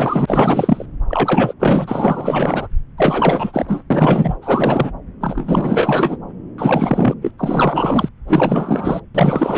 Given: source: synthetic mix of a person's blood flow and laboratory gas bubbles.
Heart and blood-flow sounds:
Doppler ultrasound of blood flow; subclavian vein
0.00-0.86 s: bubbles
1.08-1.54 s: bubbles
1.59-2.68 s: bubbles
2.97-3.83 s: bubbles
3.90-4.35 s: bubbles
4.42-4.91 s: bubbles
5.21-6.17 s: bubbles
6.58-7.14 s: bubbles
7.21-7.31 s: bubbles
7.38-8.09 s: bubbles
8.27-9.00 s: bubbles
9.14-9.58 s: bubbles
From the record:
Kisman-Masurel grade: 444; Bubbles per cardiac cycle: continuous sound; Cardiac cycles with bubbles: 100%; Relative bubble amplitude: maximal (0.775 to 0.999); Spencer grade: 4 (maximum detectable bubble signal sounding continuously throughout systole and diastole of every cardiac period, and overriding the amplitude of the normal cardiac signals); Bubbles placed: anywhere in the cardiac cycle

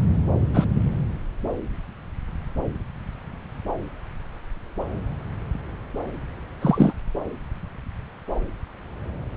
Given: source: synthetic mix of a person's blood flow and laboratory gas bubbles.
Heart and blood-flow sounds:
Doppler ultrasound of blood flow; subclavian vein
0.54-0.66 s: bubbles
6.61-6.94 s: bubbles
From the record:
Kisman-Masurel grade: 113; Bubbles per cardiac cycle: 1 to 2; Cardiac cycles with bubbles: 1 to 10%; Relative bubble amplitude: loud (0.450 to 0.775); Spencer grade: 1 (occasional bubble signal discernible with the cardiac motion signal, with majority of cardiac periods free of bubbles); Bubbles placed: anywhere in the cardiac cycle

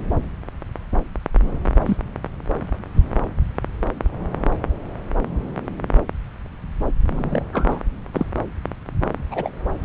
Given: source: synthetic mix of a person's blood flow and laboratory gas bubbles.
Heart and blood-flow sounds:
Doppler ultrasound of blood flow; subclavian vein
1.85-1.97 s: bubbles
7.13-7.42 s: bubbles
7.53-7.82 s: bubbles
8.13-8.27 s: bubbles
9.30-9.52 s: bubbles
From the record:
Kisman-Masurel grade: 122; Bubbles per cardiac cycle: 1 to 2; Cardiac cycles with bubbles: 10 to 50%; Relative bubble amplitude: moderate (0.250 to 0.450); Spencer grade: 2 (many but less than half of the cardiac periods contain bubble signals, singularly or in groups); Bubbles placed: anywhere in the cardiac cycle

